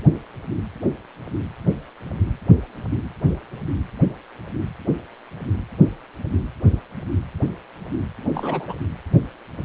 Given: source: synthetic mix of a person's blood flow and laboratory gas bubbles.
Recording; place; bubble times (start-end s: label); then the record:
Doppler ultrasound of blood flow; precordium
8.34-8.78 s: bubbles
From the record:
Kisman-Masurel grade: 211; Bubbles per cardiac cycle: several, 3 to 8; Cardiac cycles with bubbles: 1 to 10%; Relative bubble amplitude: barely perceptible (0.100 to 0.250); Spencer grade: 1 (occasional bubble signal discernible with the cardiac motion signal, with majority of cardiac periods free of bubbles); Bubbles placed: anywhere in the cardiac cycle